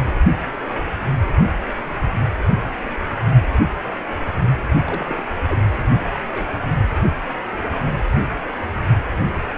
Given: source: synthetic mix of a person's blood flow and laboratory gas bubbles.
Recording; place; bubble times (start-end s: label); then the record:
Doppler ultrasound of blood flow; precordium
4.88-5.27 s: bubbles
5.47-5.62 s: bubbles
6.12-6.21 s: bubbles
6.25-6.61 s: bubbles
From the record:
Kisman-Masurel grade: 221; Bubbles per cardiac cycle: several, 3 to 8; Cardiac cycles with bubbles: 10 to 50%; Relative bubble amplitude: barely perceptible (0.100 to 0.250); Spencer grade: 2 (many but less than half of the cardiac periods contain bubble signals, singularly or in groups); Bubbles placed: only in the low amplitude regions of the cardiac cycle